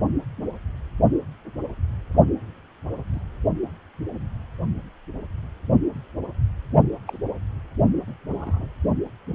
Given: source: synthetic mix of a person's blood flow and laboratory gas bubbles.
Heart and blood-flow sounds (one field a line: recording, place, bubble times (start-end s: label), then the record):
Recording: Doppler ultrasound of blood flow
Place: precordium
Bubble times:
3.14-3.20 s: bubbles
7.07-7.18 s: bubbles
8.07-8.13 s: bubbles
8.28-8.68 s: bubbles
From the record:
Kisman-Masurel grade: 121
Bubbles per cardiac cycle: 1 to 2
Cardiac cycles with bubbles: 10 to 50%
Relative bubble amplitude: barely perceptible (0.100 to 0.250)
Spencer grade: 2 (many but less than half of the cardiac periods contain bubble signals, singularly or in groups)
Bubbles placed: only in the low amplitude regions of the cardiac cycle